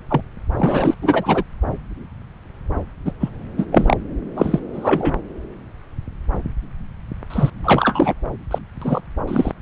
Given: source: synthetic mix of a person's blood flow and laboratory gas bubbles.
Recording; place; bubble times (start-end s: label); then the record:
Doppler ultrasound of blood flow; subclavian vein
0.09-0.21 s: bubbles
0.56-0.94 s: bubbles
1.01-1.43 s: bubbles
3.05-3.12 s: bubbles
3.20-3.29 s: bubbles
3.57-3.66 s: bubbles
3.71-3.96 s: bubbles
4.37-4.59 s: bubbles
4.73-5.15 s: bubbles
7.30-7.50 s: bubbles
7.63-8.14 s: bubbles
8.51-8.58 s: bubbles
8.81-9.01 s: bubbles
9.27-9.52 s: bubbles
From the record:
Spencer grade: 3 (all of the cardiac periods contain showers or single bubble signals, but not dominating or overriding the cardiac motion signals); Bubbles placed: anywhere in the cardiac cycle